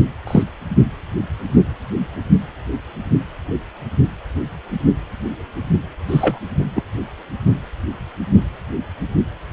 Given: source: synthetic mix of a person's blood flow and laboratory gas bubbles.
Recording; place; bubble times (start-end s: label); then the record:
Doppler ultrasound of blood flow; precordium
0.27-0.43 s: bubbles
6.08-6.39 s: bubbles
6.76-6.83 s: bubbles
From the record:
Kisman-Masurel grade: 123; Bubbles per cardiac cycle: 1 to 2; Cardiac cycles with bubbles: 10 to 50%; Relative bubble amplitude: loud (0.450 to 0.775); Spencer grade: 2 (many but less than half of the cardiac periods contain bubble signals, singularly or in groups); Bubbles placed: only in the low amplitude regions of the cardiac cycle